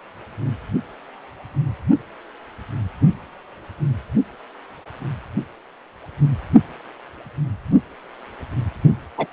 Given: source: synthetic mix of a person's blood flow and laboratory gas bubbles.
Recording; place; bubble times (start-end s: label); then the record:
Doppler ultrasound of blood flow; precordium
9.17-9.27 s: bubbles
From the record:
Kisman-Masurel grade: 113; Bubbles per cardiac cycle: 1 to 2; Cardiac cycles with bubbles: 1 to 10%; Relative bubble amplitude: loud (0.450 to 0.775); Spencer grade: 1 (occasional bubble signal discernible with the cardiac motion signal, with majority of cardiac periods free of bubbles); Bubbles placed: anywhere in the cardiac cycle